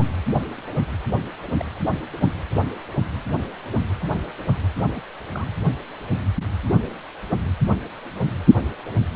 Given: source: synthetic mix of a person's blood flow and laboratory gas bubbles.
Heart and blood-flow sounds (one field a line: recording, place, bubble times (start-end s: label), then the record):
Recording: Doppler ultrasound of blood flow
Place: precordium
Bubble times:
1.58-1.64 s: bubbles
4.75-5.01 s: bubbles
5.32-5.47 s: bubbles
From the record:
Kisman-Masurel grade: 121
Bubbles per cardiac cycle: 1 to 2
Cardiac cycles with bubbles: 10 to 50%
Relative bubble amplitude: barely perceptible (0.100 to 0.250)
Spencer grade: 2 (many but less than half of the cardiac periods contain bubble signals, singularly or in groups)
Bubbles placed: anywhere in the cardiac cycle